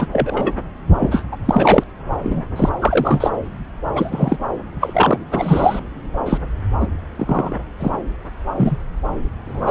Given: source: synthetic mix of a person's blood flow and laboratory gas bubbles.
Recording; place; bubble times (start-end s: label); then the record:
Doppler ultrasound of blood flow; subclavian vein
0.00-0.07 s: bubbles
0.12-0.53 s: bubbles
0.99-1.23 s: bubbles
1.31-1.36 s: bubbles
1.45-1.84 s: bubbles
2.23-2.43 s: bubbles
2.56-2.69 s: bubbles
2.81-3.31 s: bubbles
3.94-4.37 s: bubbles
4.80-5.17 s: bubbles
5.31-5.79 s: bubbles
6.25-6.39 s: bubbles
6.80-6.87 s: bubbles
7.17-7.55 s: bubbles
7.79-7.92 s: bubbles
8.57-8.77 s: bubbles
9.45-9.71 s: bubbles
From the record:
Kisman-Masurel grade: 243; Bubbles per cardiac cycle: several, 3 to 8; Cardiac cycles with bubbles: 100%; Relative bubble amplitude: loud (0.450 to 0.775); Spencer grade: 3 (all of the cardiac periods contain showers or single bubble signals, but not dominating or overriding the cardiac motion signals); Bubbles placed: anywhere in the cardiac cycle